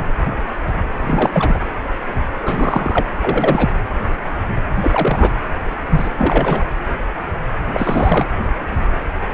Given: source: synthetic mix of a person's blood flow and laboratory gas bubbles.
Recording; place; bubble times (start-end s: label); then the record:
Doppler ultrasound of blood flow; precordium
0.00-0.03 s: bubbles
1.01-1.59 s: bubbles
2.42-3.05 s: bubbles
3.21-3.69 s: bubbles
4.82-5.34 s: bubbles
5.89-6.09 s: bubbles
6.18-6.63 s: bubbles
7.73-8.29 s: bubbles
From the record:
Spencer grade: 3 (all of the cardiac periods contain showers or single bubble signals, but not dominating or overriding the cardiac motion signals); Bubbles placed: anywhere in the cardiac cycle